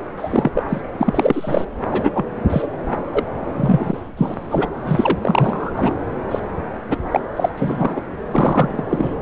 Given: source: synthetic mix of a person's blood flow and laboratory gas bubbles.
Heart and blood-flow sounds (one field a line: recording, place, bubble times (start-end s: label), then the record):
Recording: Doppler ultrasound of blood flow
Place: subclavian vein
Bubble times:
0.00-0.07 s: bubbles
0.17-0.51 s: bubbles
0.53-0.63 s: bubbles
0.68-0.81 s: bubbles
0.97-1.65 s: bubbles
1.91-2.10 s: bubbles
2.15-2.25 s: bubbles
2.50-2.68 s: bubbles
3.12-3.23 s: bubbles
3.56-3.98 s: bubbles
4.17-4.34 s: bubbles
4.50-4.68 s: bubbles
4.86-5.19 s: bubbles
5.21-5.71 s: bubbles
5.76-5.95 s: bubbles
6.31-6.40 s: bubbles
6.88-6.97 s: bubbles
7.11-7.20 s: bubbles
7.36-7.50 s: bubbles
7.57-8.02 s: bubbles
8.31-8.83 s: bubbles
8.89-9.14 s: bubbles
From the record:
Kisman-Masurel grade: 243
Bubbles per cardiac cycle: several, 3 to 8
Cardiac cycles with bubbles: 100%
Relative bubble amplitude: loud (0.450 to 0.775)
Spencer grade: 3 (all of the cardiac periods contain showers or single bubble signals, but not dominating or overriding the cardiac motion signals)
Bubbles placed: anywhere in the cardiac cycle